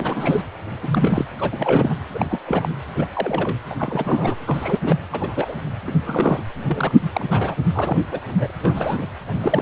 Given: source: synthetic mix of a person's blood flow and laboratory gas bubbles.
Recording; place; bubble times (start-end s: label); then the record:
Doppler ultrasound of blood flow; precordium
0.00-0.42 s: bubbles
0.82-1.24 s: bubbles
1.38-1.94 s: bubbles
2.14-2.25 s: bubbles
2.29-2.40 s: bubbles
2.47-2.69 s: bubbles
2.95-3.07 s: bubbles
3.15-3.58 s: bubbles
3.70-3.75 s: bubbles
3.79-4.35 s: bubbles
4.47-4.79 s: bubbles
4.85-4.96 s: bubbles
5.12-5.56 s: bubbles
5.86-5.94 s: bubbles
6.06-6.43 s: bubbles
6.66-6.93 s: bubbles
7.13-7.27 s: bubbles
7.30-7.55 s: bubbles
7.73-7.98 s: bubbles
8.11-8.20 s: bubbles
8.26-8.50 s: bubbles
8.63-9.06 s: bubbles
9.42-9.62 s: bubbles
From the record:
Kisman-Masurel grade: 242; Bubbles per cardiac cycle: several, 3 to 8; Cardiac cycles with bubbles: 100%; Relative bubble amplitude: moderate (0.250 to 0.450); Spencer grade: 3 (all of the cardiac periods contain showers or single bubble signals, but not dominating or overriding the cardiac motion signals); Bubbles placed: anywhere in the cardiac cycle